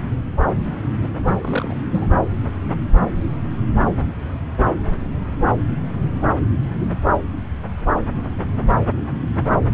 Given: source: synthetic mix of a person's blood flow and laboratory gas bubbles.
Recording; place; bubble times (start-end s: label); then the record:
Doppler ultrasound of blood flow; subclavian vein
1.02-1.09 s: bubbles
1.18-1.35 s: bubbles
1.41-1.73 s: bubbles
1.92-2.07 s: bubbles
From the record:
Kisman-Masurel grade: 211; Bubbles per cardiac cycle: several, 3 to 8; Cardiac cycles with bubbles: 1 to 10%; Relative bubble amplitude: barely perceptible (0.100 to 0.250); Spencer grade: 1 (occasional bubble signal discernible with the cardiac motion signal, with majority of cardiac periods free of bubbles); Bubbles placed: anywhere in the cardiac cycle